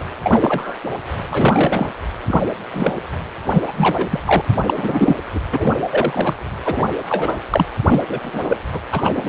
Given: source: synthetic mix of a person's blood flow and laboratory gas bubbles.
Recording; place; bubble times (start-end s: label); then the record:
Doppler ultrasound of blood flow; precordium
0.00-0.04 s: bubbles
0.23-0.77 s: bubbles
1.30-1.92 s: bubbles
2.26-2.42 s: bubbles
2.71-2.93 s: bubbles
3.52-3.62 s: bubbles
3.67-3.72 s: bubbles
3.77-4.08 s: bubbles
4.10-4.20 s: bubbles
4.25-4.42 s: bubbles
4.62-5.17 s: bubbles
5.33-5.40 s: bubbles
5.52-5.75 s: bubbles
5.89-6.36 s: bubbles
6.64-6.92 s: bubbles
7.09-7.36 s: bubbles
7.50-7.66 s: bubbles
7.87-8.02 s: bubbles
8.08-8.58 s: bubbles
8.73-8.80 s: bubbles
8.92-9.29 s: bubbles
From the record:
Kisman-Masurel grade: 233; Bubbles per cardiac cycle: several, 3 to 8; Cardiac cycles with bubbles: 50 to 99%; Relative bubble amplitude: loud (0.450 to 0.775); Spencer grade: 3 (all of the cardiac periods contain showers or single bubble signals, but not dominating or overriding the cardiac motion signals); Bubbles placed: anywhere in the cardiac cycle